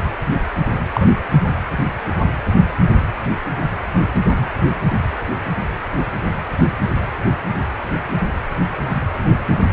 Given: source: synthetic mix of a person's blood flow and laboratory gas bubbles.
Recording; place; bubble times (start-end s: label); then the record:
Doppler ultrasound of blood flow; precordium
0.93-1.08 s: bubbles
From the record:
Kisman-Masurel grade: 113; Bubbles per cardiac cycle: 1 to 2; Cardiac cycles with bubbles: 1 to 10%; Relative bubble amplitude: loud (0.450 to 0.775); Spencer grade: 1 (occasional bubble signal discernible with the cardiac motion signal, with majority of cardiac periods free of bubbles); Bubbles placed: anywhere in the cardiac cycle